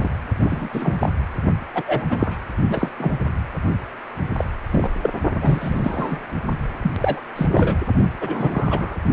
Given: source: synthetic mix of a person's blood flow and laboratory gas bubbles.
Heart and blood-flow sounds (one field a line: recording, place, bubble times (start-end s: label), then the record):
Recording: Doppler ultrasound of blood flow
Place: precordium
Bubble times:
0.00-0.10 s: bubbles
0.38-0.69 s: bubbles
0.72-1.09 s: bubbles
1.75-1.83 s: bubbles
1.88-2.05 s: bubbles
2.09-2.38 s: bubbles
2.69-2.88 s: bubbles
2.98-3.17 s: bubbles
4.37-4.45 s: bubbles
4.71-4.91 s: bubbles
5.02-5.10 s: bubbles
5.42-6.17 s: bubbles
6.81-6.91 s: bubbles
6.96-7.21 s: bubbles
7.35-7.46 s: bubbles
7.51-7.77 s: bubbles
8.20-8.96 s: bubbles
From the record:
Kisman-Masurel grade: 243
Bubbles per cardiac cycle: several, 3 to 8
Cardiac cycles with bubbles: 100%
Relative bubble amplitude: loud (0.450 to 0.775)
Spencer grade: 3 (all of the cardiac periods contain showers or single bubble signals, but not dominating or overriding the cardiac motion signals)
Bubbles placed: only in the low amplitude regions of the cardiac cycle